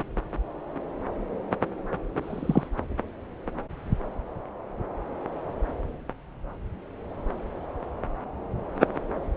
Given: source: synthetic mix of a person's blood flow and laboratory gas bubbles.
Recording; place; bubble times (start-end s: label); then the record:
Doppler ultrasound of blood flow; subclavian vein
2.21-2.69 s: bubbles
From the record:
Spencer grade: 1 (occasional bubble signal discernible with the cardiac motion signal, with majority of cardiac periods free of bubbles); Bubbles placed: anywhere in the cardiac cycle